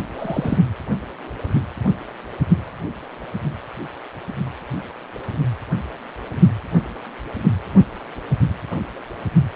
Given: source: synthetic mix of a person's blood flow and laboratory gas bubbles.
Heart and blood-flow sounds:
Doppler ultrasound of blood flow; precordium
0.18-0.58 s: bubbles
From the record:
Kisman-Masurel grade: 112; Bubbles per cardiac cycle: 1 to 2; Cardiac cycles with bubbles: 1 to 10%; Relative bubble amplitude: moderate (0.250 to 0.450); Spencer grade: 1 (occasional bubble signal discernible with the cardiac motion signal, with majority of cardiac periods free of bubbles); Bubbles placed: anywhere in the cardiac cycle

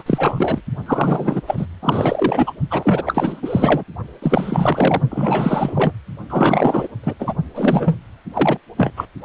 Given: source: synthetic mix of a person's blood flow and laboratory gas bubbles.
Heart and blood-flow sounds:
Doppler ultrasound of blood flow; precordium
0.00-0.61 s: bubbles
0.86-1.42 s: bubbles
1.47-1.66 s: bubbles
1.81-2.52 s: bubbles
2.71-3.83 s: bubbles
4.21-5.02 s: bubbles
5.10-5.92 s: bubbles
6.29-6.88 s: bubbles
7.04-7.14 s: bubbles
7.19-7.33 s: bubbles
7.54-7.96 s: bubbles
8.34-8.60 s: bubbles
8.77-8.92 s: bubbles
8.96-9.05 s: bubbles
From the record:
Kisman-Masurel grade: 444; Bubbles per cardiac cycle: continuous sound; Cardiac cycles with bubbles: 100%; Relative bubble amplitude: maximal (0.775 to 0.999); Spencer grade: 4 (maximum detectable bubble signal sounding continuously throughout systole and diastole of every cardiac period, and overriding the amplitude of the normal cardiac signals); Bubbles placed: only in the low amplitude regions of the cardiac cycle

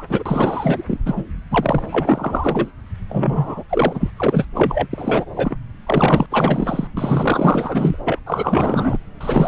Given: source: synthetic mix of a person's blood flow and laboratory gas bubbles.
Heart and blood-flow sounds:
Doppler ultrasound of blood flow; subclavian vein
0.00-0.03 s: bubbles
0.09-0.84 s: bubbles
0.87-0.98 s: bubbles
1.06-1.25 s: bubbles
1.50-2.72 s: bubbles
3.08-3.64 s: bubbles
3.69-4.11 s: bubbles
4.17-4.45 s: bubbles
4.55-4.87 s: bubbles
4.92-5.25 s: bubbles
5.36-5.57 s: bubbles
5.87-6.26 s: bubbles
6.30-6.88 s: bubbles
6.97-7.96 s: bubbles
8.04-8.19 s: bubbles
8.26-8.98 s: bubbles
9.21-9.48 s: bubbles
From the record:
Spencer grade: 4 (maximum detectable bubble signal sounding continuously throughout systole and diastole of every cardiac period, and overriding the amplitude of the normal cardiac signals); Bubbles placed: anywhere in the cardiac cycle

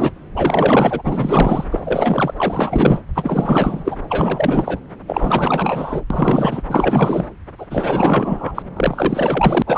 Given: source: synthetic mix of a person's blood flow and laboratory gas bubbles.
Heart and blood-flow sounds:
Doppler ultrasound of blood flow; subclavian vein
0.00-0.11 s: bubbles
0.35-1.65 s: bubbles
1.71-2.34 s: bubbles
2.37-3.02 s: bubbles
3.15-3.96 s: bubbles
4.08-4.79 s: bubbles
5.07-6.01 s: bubbles
6.10-6.62 s: bubbles
6.68-7.26 s: bubbles
7.58-7.66 s: bubbles
7.70-8.62 s: bubbles
8.76-9.62 s: bubbles
9.66-9.78 s: bubbles
From the record:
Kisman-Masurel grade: 444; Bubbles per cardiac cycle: continuous sound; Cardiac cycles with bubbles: 100%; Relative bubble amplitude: maximal (0.775 to 0.999); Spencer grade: 4 (maximum detectable bubble signal sounding continuously throughout systole and diastole of every cardiac period, and overriding the amplitude of the normal cardiac signals); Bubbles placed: anywhere in the cardiac cycle

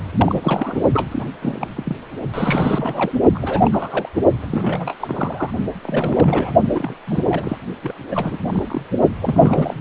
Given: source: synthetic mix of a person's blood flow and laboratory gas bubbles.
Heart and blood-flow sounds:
Doppler ultrasound of blood flow; precordium
0.17-0.80 s: bubbles
0.94-1.25 s: bubbles
1.42-1.68 s: bubbles
1.76-1.97 s: bubbles
2.33-3.12 s: bubbles
3.34-3.39 s: bubbles
3.42-4.09 s: bubbles
4.42-4.46 s: bubbles
4.48-5.50 s: bubbles
5.83-6.51 s: bubbles
6.64-6.96 s: bubbles
7.07-7.58 s: bubbles
7.83-7.95 s: bubbles
8.11-8.38 s: bubbles
8.47-8.88 s: bubbles
9.21-9.81 s: bubbles
From the record:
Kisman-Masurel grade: 342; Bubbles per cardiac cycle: rolling drumbeat, 9 or more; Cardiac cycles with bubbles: 100%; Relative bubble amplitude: moderate (0.250 to 0.450); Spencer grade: 3 (all of the cardiac periods contain showers or single bubble signals, but not dominating or overriding the cardiac motion signals); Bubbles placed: only in the low amplitude regions of the cardiac cycle

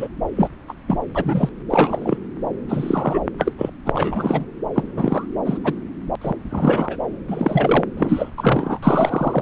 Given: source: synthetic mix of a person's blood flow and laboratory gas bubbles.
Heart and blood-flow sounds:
Doppler ultrasound of blood flow; subclavian vein
0.00-0.08 s: bubbles
0.36-0.48 s: bubbles
0.68-0.72 s: bubbles
0.87-0.98 s: bubbles
1.15-1.49 s: bubbles
1.70-2.18 s: bubbles
2.69-3.21 s: bubbles
3.38-3.52 s: bubbles
3.58-3.70 s: bubbles
3.86-4.46 s: bubbles
4.74-4.83 s: bubbles
4.97-5.25 s: bubbles
5.45-5.58 s: bubbles
5.63-5.73 s: bubbles
6.21-6.32 s: bubbles
6.50-6.97 s: bubbles
7.28-7.85 s: bubbles
7.97-8.30 s: bubbles
8.38-8.78 s: bubbles
8.82-9.42 s: bubbles
From the record:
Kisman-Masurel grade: 242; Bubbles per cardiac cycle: several, 3 to 8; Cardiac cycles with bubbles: 100%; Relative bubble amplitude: moderate (0.250 to 0.450); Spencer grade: 3 (all of the cardiac periods contain showers or single bubble signals, but not dominating or overriding the cardiac motion signals); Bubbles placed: anywhere in the cardiac cycle

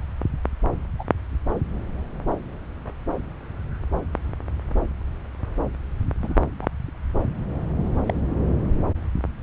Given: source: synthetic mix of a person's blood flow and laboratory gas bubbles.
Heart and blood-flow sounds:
Doppler ultrasound of blood flow; subclavian vein
0.99-1.03 s: bubbles
6.22-6.45 s: bubbles
6.62-6.67 s: bubbles
8.07-8.14 s: bubbles
From the record:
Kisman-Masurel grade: 121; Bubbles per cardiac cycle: 1 to 2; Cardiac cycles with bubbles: 10 to 50%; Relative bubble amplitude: barely perceptible (0.100 to 0.250); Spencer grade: 2 (many but less than half of the cardiac periods contain bubble signals, singularly or in groups); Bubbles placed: anywhere in the cardiac cycle

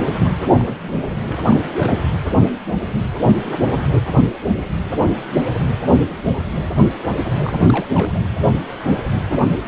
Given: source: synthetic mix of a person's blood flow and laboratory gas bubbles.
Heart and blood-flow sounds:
Doppler ultrasound of blood flow; precordium
0.00-0.33 s: bubbles
0.39-0.49 s: bubbles
0.58-0.78 s: bubbles
0.87-0.92 s: bubbles
1.27-1.56 s: bubbles
1.77-2.07 s: bubbles
7.44-7.87 s: bubbles
7.95-8.20 s: bubbles
From the record:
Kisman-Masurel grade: 221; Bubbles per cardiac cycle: several, 3 to 8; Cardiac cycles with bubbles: 10 to 50%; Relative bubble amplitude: barely perceptible (0.100 to 0.250); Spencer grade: 2 (many but less than half of the cardiac periods contain bubble signals, singularly or in groups); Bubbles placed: anywhere in the cardiac cycle

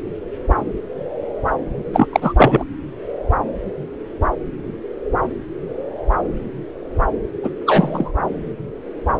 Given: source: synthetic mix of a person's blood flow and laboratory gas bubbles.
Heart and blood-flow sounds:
Doppler ultrasound of blood flow; subclavian vein
1.93-2.07 s: bubbles
2.12-2.33 s: bubbles
2.37-2.63 s: bubbles
7.43-7.50 s: bubbles
7.66-8.12 s: bubbles
From the record:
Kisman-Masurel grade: 223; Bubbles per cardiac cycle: several, 3 to 8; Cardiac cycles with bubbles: 10 to 50%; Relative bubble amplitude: loud (0.450 to 0.775); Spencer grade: 2 (many but less than half of the cardiac periods contain bubble signals, singularly or in groups); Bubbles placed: anywhere in the cardiac cycle

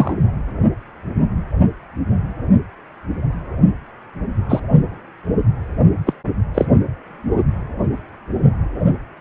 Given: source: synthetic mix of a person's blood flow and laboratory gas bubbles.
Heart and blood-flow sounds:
Doppler ultrasound of blood flow; precordium
0.00-0.14 s: bubbles
4.49-4.60 s: bubbles
6.06-6.13 s: bubbles
6.54-6.66 s: bubbles
From the record:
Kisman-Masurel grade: 123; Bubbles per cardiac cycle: 1 to 2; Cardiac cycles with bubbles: 10 to 50%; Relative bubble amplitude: loud (0.450 to 0.775); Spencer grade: 2 (many but less than half of the cardiac periods contain bubble signals, singularly or in groups); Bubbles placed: only in the low amplitude regions of the cardiac cycle

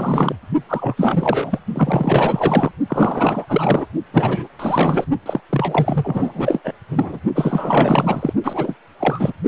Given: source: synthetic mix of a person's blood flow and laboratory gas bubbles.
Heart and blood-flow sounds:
Doppler ultrasound of blood flow; precordium
0.00-0.35 s: bubbles
0.68-1.59 s: bubbles
1.74-2.71 s: bubbles
2.87-3.44 s: bubbles
3.48-3.88 s: bubbles
4.12-4.48 s: bubbles
4.59-5.05 s: bubbles
5.25-5.41 s: bubbles
5.49-6.61 s: bubbles
6.64-6.73 s: bubbles
6.91-7.19 s: bubbles
7.35-8.33 s: bubbles
8.44-8.77 s: bubbles
8.99-9.33 s: bubbles
9.43-9.48 s: bubbles
From the record:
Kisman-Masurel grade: 444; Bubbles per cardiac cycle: continuous sound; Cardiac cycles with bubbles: 100%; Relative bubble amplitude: maximal (0.775 to 0.999); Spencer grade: 4 (maximum detectable bubble signal sounding continuously throughout systole and diastole of every cardiac period, and overriding the amplitude of the normal cardiac signals); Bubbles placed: only in the low amplitude regions of the cardiac cycle

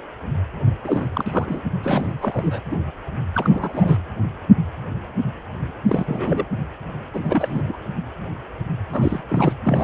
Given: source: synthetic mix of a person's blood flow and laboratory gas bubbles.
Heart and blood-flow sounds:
Doppler ultrasound of blood flow; precordium
0.84-1.07 s: bubbles
1.15-1.61 s: bubbles
1.82-2.12 s: bubbles
2.21-2.61 s: bubbles
2.70-2.77 s: bubbles
3.35-3.98 s: bubbles
5.86-6.45 s: bubbles
7.13-7.62 s: bubbles
7.65-7.76 s: bubbles
8.92-9.21 s: bubbles
9.29-9.53 s: bubbles
9.64-9.84 s: bubbles
From the record:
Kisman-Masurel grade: 332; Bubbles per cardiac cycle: rolling drumbeat, 9 or more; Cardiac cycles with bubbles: 50 to 99%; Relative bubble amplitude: moderate (0.250 to 0.450); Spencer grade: 3 (all of the cardiac periods contain showers or single bubble signals, but not dominating or overriding the cardiac motion signals); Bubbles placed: anywhere in the cardiac cycle

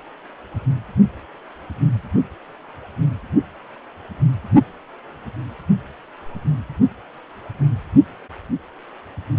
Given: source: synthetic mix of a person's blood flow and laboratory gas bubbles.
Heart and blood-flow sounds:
Doppler ultrasound of blood flow; precordium
no bubbles
From the record:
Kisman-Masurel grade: 000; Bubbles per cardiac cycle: 0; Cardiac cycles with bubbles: 0%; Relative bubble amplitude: no bubbles discernible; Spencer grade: 0 (complete lack of bubble signals)

